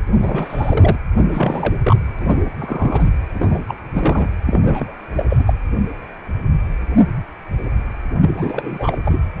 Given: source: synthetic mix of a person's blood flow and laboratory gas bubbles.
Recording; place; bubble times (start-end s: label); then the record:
Doppler ultrasound of blood flow; precordium
0.07-0.98 s: bubbles
1.31-1.73 s: bubbles
1.83-1.96 s: bubbles
2.19-2.40 s: bubbles
2.44-2.50 s: bubbles
2.58-3.12 s: bubbles
3.34-3.63 s: bubbles
3.68-3.74 s: bubbles
3.93-4.28 s: bubbles
4.46-4.92 s: bubbles
5.15-5.25 s: bubbles
5.29-5.43 s: bubbles
5.45-5.53 s: bubbles
8.21-8.97 s: bubbles
9.05-9.21 s: bubbles
From the record:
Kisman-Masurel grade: 332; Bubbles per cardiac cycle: rolling drumbeat, 9 or more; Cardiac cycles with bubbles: 50 to 99%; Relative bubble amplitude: moderate (0.250 to 0.450); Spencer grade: 3 (all of the cardiac periods contain showers or single bubble signals, but not dominating or overriding the cardiac motion signals); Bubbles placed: anywhere in the cardiac cycle